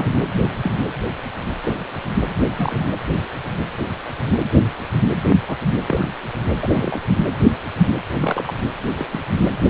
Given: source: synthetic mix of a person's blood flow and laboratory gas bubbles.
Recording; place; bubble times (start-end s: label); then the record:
Doppler ultrasound of blood flow; precordium
0.00-0.10 s: bubbles
0.63-0.74 s: bubbles
1.60-1.76 s: bubbles
2.57-2.87 s: bubbles
5.27-5.33 s: bubbles
5.47-5.56 s: bubbles
5.86-6.09 s: bubbles
6.61-7.00 s: bubbles
8.20-8.54 s: bubbles
8.96-9.09 s: bubbles
9.12-9.21 s: bubbles
From the record:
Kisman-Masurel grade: 122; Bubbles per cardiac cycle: 1 to 2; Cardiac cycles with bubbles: 10 to 50%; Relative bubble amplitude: moderate (0.250 to 0.450); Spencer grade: 2 (many but less than half of the cardiac periods contain bubble signals, singularly or in groups); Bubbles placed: anywhere in the cardiac cycle